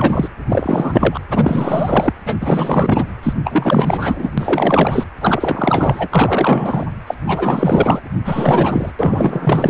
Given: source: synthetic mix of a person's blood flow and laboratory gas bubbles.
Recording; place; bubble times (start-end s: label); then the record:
Doppler ultrasound of blood flow; precordium
0.00-0.28 s: bubbles
0.49-1.20 s: bubbles
1.30-2.13 s: bubbles
2.25-2.37 s: bubbles
2.40-3.05 s: bubbles
3.23-3.33 s: bubbles
3.44-4.31 s: bubbles
4.38-5.04 s: bubbles
5.19-6.87 s: bubbles
7.06-7.14 s: bubbles
7.26-8.01 s: bubbles
8.25-8.92 s: bubbles
8.99-9.70 s: bubbles
From the record:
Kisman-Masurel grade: 444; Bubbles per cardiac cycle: continuous sound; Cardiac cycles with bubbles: 100%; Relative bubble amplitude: maximal (0.775 to 0.999); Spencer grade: 4 (maximum detectable bubble signal sounding continuously throughout systole and diastole of every cardiac period, and overriding the amplitude of the normal cardiac signals); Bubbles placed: anywhere in the cardiac cycle